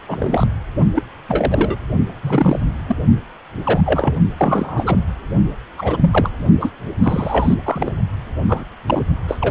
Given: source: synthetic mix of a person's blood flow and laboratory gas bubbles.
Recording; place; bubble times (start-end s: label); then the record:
Doppler ultrasound of blood flow; precordium
0.07-0.46 s: bubbles
0.95-1.03 s: bubbles
1.28-1.76 s: bubbles
2.23-2.62 s: bubbles
2.86-2.96 s: bubbles
3.63-3.81 s: bubbles
3.85-4.14 s: bubbles
4.37-5.02 s: bubbles
5.78-6.30 s: bubbles
6.60-6.72 s: bubbles
7.03-7.55 s: bubbles
7.65-7.93 s: bubbles
8.48-8.64 s: bubbles
8.88-9.02 s: bubbles
9.28-9.50 s: bubbles
From the record:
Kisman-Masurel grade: 242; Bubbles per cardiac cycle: several, 3 to 8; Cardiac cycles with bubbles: 100%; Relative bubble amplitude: moderate (0.250 to 0.450); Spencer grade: 3 (all of the cardiac periods contain showers or single bubble signals, but not dominating or overriding the cardiac motion signals); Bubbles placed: only in the low amplitude regions of the cardiac cycle